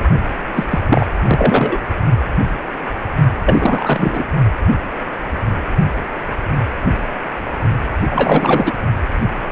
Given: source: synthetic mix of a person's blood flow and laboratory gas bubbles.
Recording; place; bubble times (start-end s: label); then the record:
Doppler ultrasound of blood flow; precordium
0.55-0.65 s: bubbles
0.69-0.79 s: bubbles
0.90-1.06 s: bubbles
1.24-1.78 s: bubbles
3.45-4.24 s: bubbles
8.07-8.72 s: bubbles
From the record:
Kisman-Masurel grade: 333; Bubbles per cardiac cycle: rolling drumbeat, 9 or more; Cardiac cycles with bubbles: 50 to 99%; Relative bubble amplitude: loud (0.450 to 0.775); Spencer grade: 3 (all of the cardiac periods contain showers or single bubble signals, but not dominating or overriding the cardiac motion signals); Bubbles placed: only in the low amplitude regions of the cardiac cycle